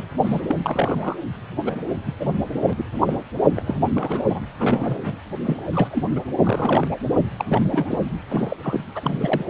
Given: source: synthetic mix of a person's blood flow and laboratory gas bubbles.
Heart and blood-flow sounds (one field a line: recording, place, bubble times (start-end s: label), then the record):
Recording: Doppler ultrasound of blood flow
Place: precordium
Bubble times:
0.00-0.05 s: bubbles
0.17-0.40 s: bubbles
0.47-0.56 s: bubbles
0.62-1.16 s: bubbles
1.64-1.76 s: bubbles
2.05-2.12 s: bubbles
2.20-2.27 s: bubbles
2.55-2.60 s: bubbles
2.63-2.73 s: bubbles
2.76-2.84 s: bubbles
3.04-3.24 s: bubbles
3.55-3.76 s: bubbles
3.95-4.23 s: bubbles
4.29-4.41 s: bubbles
4.58-5.19 s: bubbles
5.45-5.62 s: bubbles
5.73-6.04 s: bubbles
6.16-6.20 s: bubbles
6.42-6.88 s: bubbles
6.91-6.96 s: bubbles
7.37-7.45 s: bubbles
7.49-8.11 s: bubbles
8.29-8.56 s: bubbles
8.63-8.80 s: bubbles
8.95-9.44 s: bubbles
From the record:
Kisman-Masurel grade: 242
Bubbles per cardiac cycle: several, 3 to 8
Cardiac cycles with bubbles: 100%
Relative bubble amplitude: moderate (0.250 to 0.450)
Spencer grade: 3 (all of the cardiac periods contain showers or single bubble signals, but not dominating or overriding the cardiac motion signals)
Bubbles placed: anywhere in the cardiac cycle